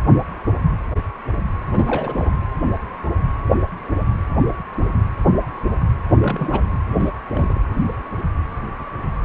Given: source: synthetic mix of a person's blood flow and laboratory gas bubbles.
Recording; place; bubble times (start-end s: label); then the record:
Doppler ultrasound of blood flow; precordium
1.72-2.33 s: bubbles
6.16-6.62 s: bubbles
6.88-7.10 s: bubbles
7.33-7.61 s: bubbles
From the record:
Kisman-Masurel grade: 221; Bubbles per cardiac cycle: several, 3 to 8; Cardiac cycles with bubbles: 10 to 50%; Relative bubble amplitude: barely perceptible (0.100 to 0.250); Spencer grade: 2 (many but less than half of the cardiac periods contain bubble signals, singularly or in groups); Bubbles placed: anywhere in the cardiac cycle